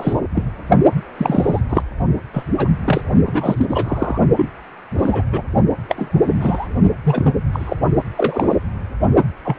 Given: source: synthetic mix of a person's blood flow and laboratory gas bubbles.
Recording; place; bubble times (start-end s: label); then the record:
Doppler ultrasound of blood flow; precordium
0.00-0.16 s: bubbles
0.35-0.43 s: bubbles
1.17-1.61 s: bubbles
1.69-1.82 s: bubbles
2.33-2.44 s: bubbles
2.58-2.69 s: bubbles
2.85-3.02 s: bubbles
3.26-3.66 s: bubbles
3.70-4.18 s: bubbles
4.36-4.49 s: bubbles
4.97-5.23 s: bubbles
5.32-5.42 s: bubbles
5.88-6.34 s: bubbles
6.40-6.67 s: bubbles
7.03-7.33 s: bubbles
7.52-7.75 s: bubbles
8.17-8.55 s: bubbles
9.45-9.56 s: bubbles
From the record:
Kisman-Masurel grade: 243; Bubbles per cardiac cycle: several, 3 to 8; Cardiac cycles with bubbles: 100%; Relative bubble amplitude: loud (0.450 to 0.775); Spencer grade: 3 (all of the cardiac periods contain showers or single bubble signals, but not dominating or overriding the cardiac motion signals); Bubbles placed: only in the low amplitude regions of the cardiac cycle